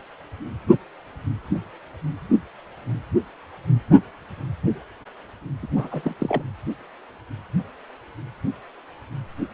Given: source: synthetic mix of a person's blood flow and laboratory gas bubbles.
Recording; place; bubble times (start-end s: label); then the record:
Doppler ultrasound of blood flow; precordium
5.62-5.67 s: bubbles
5.75-5.88 s: bubbles
5.91-6.15 s: bubbles
6.20-6.42 s: bubbles
From the record:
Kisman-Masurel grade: 212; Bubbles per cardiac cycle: several, 3 to 8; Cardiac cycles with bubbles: 1 to 10%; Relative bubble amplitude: moderate (0.250 to 0.450); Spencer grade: 1 (occasional bubble signal discernible with the cardiac motion signal, with majority of cardiac periods free of bubbles); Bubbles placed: anywhere in the cardiac cycle